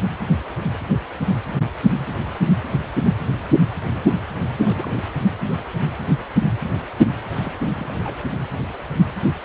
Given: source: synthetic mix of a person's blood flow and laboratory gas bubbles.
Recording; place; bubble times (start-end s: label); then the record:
Doppler ultrasound of blood flow; precordium
4.61-5.02 s: bubbles
7.42-7.58 s: bubbles
7.75-8.21 s: bubbles
From the record:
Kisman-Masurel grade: 211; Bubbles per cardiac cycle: several, 3 to 8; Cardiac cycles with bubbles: 1 to 10%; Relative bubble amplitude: barely perceptible (0.100 to 0.250); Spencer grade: 1 (occasional bubble signal discernible with the cardiac motion signal, with majority of cardiac periods free of bubbles); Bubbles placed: anywhere in the cardiac cycle